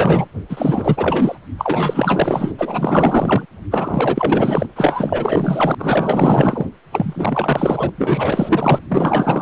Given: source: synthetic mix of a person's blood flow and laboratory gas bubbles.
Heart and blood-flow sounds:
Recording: Doppler ultrasound of blood flow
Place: precordium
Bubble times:
0.00-0.28 s: bubbles
0.49-1.38 s: bubbles
1.58-2.52 s: bubbles
2.58-3.46 s: bubbles
3.71-4.66 s: bubbles
4.75-5.75 s: bubbles
5.79-6.66 s: bubbles
6.92-7.90 s: bubbles
7.97-8.80 s: bubbles
8.89-9.42 s: bubbles
From the record:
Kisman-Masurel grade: 444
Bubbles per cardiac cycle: continuous sound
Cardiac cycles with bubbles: 100%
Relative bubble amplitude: maximal (0.775 to 0.999)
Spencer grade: 4 (maximum detectable bubble signal sounding continuously throughout systole and diastole of every cardiac period, and overriding the amplitude of the normal cardiac signals)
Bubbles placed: anywhere in the cardiac cycle

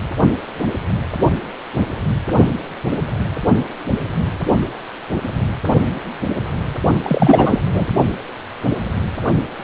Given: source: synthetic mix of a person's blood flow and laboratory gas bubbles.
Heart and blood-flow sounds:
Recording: Doppler ultrasound of blood flow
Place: precordium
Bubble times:
7.03-7.59 s: bubbles
7.72-7.88 s: bubbles
From the record:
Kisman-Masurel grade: 213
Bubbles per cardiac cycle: several, 3 to 8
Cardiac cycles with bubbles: 1 to 10%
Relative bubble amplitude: loud (0.450 to 0.775)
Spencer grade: 1 (occasional bubble signal discernible with the cardiac motion signal, with majority of cardiac periods free of bubbles)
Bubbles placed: only in the low amplitude regions of the cardiac cycle

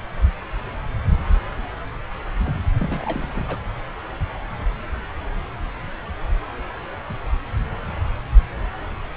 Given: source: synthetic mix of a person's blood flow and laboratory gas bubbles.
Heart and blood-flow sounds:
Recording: Doppler ultrasound of blood flow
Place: subclavian vein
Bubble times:
2.44-2.54 s: bubbles
2.78-3.59 s: bubbles
From the record:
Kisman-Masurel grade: 211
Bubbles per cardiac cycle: several, 3 to 8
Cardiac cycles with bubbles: 1 to 10%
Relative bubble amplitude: barely perceptible (0.100 to 0.250)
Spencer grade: 1 (occasional bubble signal discernible with the cardiac motion signal, with majority of cardiac periods free of bubbles)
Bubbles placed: anywhere in the cardiac cycle

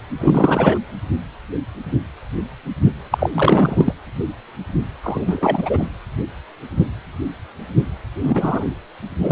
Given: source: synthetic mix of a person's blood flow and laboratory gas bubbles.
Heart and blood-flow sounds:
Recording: Doppler ultrasound of blood flow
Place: precordium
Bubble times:
0.20-0.78 s: bubbles
3.11-3.29 s: bubbles
3.33-3.93 s: bubbles
5.03-5.89 s: bubbles
8.23-8.64 s: bubbles
9.20-9.32 s: bubbles
From the record:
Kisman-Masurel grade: 223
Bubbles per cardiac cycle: several, 3 to 8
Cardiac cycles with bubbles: 10 to 50%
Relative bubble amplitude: loud (0.450 to 0.775)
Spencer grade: 2 (many but less than half of the cardiac periods contain bubble signals, singularly or in groups)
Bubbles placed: anywhere in the cardiac cycle

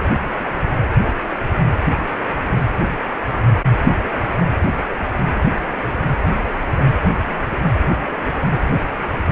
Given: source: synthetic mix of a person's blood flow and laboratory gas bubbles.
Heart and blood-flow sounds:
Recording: Doppler ultrasound of blood flow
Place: precordium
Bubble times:
4.89-4.95 s: bubbles
From the record:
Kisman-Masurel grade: 112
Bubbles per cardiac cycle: 1 to 2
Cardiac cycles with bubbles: 1 to 10%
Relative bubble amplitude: moderate (0.250 to 0.450)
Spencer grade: 1 (occasional bubble signal discernible with the cardiac motion signal, with majority of cardiac periods free of bubbles)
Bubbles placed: anywhere in the cardiac cycle

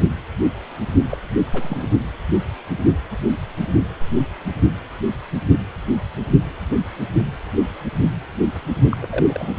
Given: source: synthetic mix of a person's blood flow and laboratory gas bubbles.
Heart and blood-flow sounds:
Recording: Doppler ultrasound of blood flow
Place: precordium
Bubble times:
1.10-1.17 s: bubbles
1.41-1.90 s: bubbles
8.90-8.97 s: bubbles
9.02-9.57 s: bubbles
From the record:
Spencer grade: 2 (many but less than half of the cardiac periods contain bubble signals, singularly or in groups)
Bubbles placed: only in the low amplitude regions of the cardiac cycle

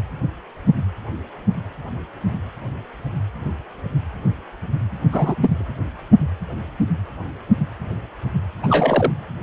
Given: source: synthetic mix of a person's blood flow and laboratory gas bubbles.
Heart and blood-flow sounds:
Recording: Doppler ultrasound of blood flow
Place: precordium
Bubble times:
5.09-5.36 s: bubbles
5.41-5.66 s: bubbles
8.62-9.12 s: bubbles
From the record:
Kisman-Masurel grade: 212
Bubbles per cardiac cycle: several, 3 to 8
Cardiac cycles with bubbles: 1 to 10%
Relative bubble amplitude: moderate (0.250 to 0.450)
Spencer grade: 1 (occasional bubble signal discernible with the cardiac motion signal, with majority of cardiac periods free of bubbles)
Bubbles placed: anywhere in the cardiac cycle

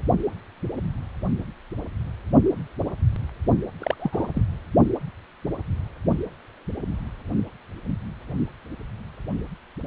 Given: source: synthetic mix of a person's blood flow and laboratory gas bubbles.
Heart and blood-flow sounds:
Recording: Doppler ultrasound of blood flow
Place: precordium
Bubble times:
3.80-3.95 s: bubbles
3.99-4.31 s: bubbles
4.34-4.42 s: bubbles
From the record:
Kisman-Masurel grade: 211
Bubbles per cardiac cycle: several, 3 to 8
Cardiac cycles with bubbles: 1 to 10%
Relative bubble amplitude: barely perceptible (0.100 to 0.250)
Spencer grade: 1 (occasional bubble signal discernible with the cardiac motion signal, with majority of cardiac periods free of bubbles)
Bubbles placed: only in the low amplitude regions of the cardiac cycle

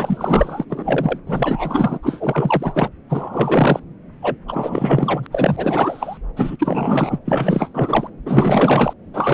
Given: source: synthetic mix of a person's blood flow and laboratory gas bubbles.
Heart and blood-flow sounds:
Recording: Doppler ultrasound of blood flow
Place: subclavian vein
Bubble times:
0.00-0.65 s: bubbles
0.70-1.19 s: bubbles
1.27-1.99 s: bubbles
2.02-2.90 s: bubbles
3.09-3.80 s: bubbles
4.21-4.37 s: bubbles
4.48-5.26 s: bubbles
5.32-6.17 s: bubbles
6.37-6.56 s: bubbles
6.59-7.18 s: bubbles
7.25-7.70 s: bubbles
7.74-8.08 s: bubbles
8.25-8.94 s: bubbles
9.14-9.34 s: bubbles
From the record:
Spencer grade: 4 (maximum detectable bubble signal sounding continuously throughout systole and diastole of every cardiac period, and overriding the amplitude of the normal cardiac signals)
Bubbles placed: anywhere in the cardiac cycle

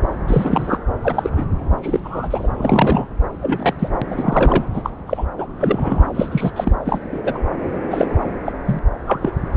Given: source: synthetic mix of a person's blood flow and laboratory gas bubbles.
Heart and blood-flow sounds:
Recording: Doppler ultrasound of blood flow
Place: subclavian vein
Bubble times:
0.27-0.78 s: bubbles
1.02-1.45 s: bubbles
1.82-2.00 s: bubbles
2.04-2.48 s: bubbles
2.57-3.06 s: bubbles
3.42-3.74 s: bubbles
3.79-3.89 s: bubbles
4.02-4.07 s: bubbles
4.10-4.64 s: bubbles
4.74-4.90 s: bubbles
5.07-5.26 s: bubbles
5.38-5.47 s: bubbles
5.60-6.08 s: bubbles
6.15-6.52 s: bubbles
6.56-6.76 s: bubbles
6.85-7.40 s: bubbles
7.91-8.07 s: bubbles
8.45-8.52 s: bubbles
8.65-8.79 s: bubbles
9.06-9.31 s: bubbles
From the record:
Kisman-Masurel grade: 243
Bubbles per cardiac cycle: several, 3 to 8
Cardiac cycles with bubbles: 100%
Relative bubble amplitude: loud (0.450 to 0.775)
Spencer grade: 3 (all of the cardiac periods contain showers or single bubble signals, but not dominating or overriding the cardiac motion signals)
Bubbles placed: anywhere in the cardiac cycle

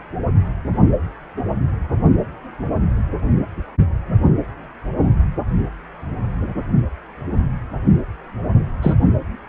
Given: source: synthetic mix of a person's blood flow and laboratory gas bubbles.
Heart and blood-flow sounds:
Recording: Doppler ultrasound of blood flow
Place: precordium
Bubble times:
8.81-8.95 s: bubbles
From the record:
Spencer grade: 1 (occasional bubble signal discernible with the cardiac motion signal, with majority of cardiac periods free of bubbles)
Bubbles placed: anywhere in the cardiac cycle

